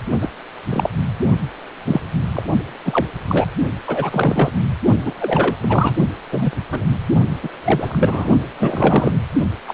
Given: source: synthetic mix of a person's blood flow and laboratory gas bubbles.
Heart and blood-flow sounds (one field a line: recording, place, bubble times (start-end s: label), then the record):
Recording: Doppler ultrasound of blood flow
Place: precordium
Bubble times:
0.20-0.30 s: bubbles
0.70-0.88 s: bubbles
1.85-2.00 s: bubbles
2.33-2.42 s: bubbles
2.85-3.06 s: bubbles
3.27-3.48 s: bubbles
3.87-4.52 s: bubbles
5.05-5.14 s: bubbles
5.18-5.57 s: bubbles
5.59-5.95 s: bubbles
6.32-6.51 s: bubbles
6.70-6.86 s: bubbles
7.42-7.49 s: bubbles
7.64-8.29 s: bubbles
8.60-9.21 s: bubbles
9.67-9.74 s: bubbles
From the record:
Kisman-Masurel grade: 243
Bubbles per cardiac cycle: several, 3 to 8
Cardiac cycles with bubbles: 100%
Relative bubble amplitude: loud (0.450 to 0.775)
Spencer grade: 3 (all of the cardiac periods contain showers or single bubble signals, but not dominating or overriding the cardiac motion signals)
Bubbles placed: only in the low amplitude regions of the cardiac cycle